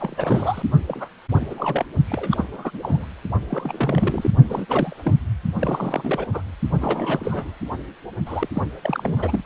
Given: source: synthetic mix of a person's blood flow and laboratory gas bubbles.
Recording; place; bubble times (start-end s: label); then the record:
Doppler ultrasound of blood flow; precordium
0.00-0.62 s: bubbles
0.86-1.08 s: bubbles
1.39-1.85 s: bubbles
2.06-2.45 s: bubbles
2.52-2.79 s: bubbles
2.81-3.06 s: bubbles
3.50-4.30 s: bubbles
4.44-4.65 s: bubbles
4.68-4.96 s: bubbles
5.03-5.16 s: bubbles
5.58-6.26 s: bubbles
6.33-6.42 s: bubbles
6.80-7.51 s: bubbles
8.26-8.49 s: bubbles
8.55-8.62 s: bubbles
8.83-9.44 s: bubbles
From the record:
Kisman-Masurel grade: 332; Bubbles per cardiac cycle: rolling drumbeat, 9 or more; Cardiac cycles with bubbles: 50 to 99%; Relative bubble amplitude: moderate (0.250 to 0.450); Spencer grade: 3 (all of the cardiac periods contain showers or single bubble signals, but not dominating or overriding the cardiac motion signals); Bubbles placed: only in the low amplitude regions of the cardiac cycle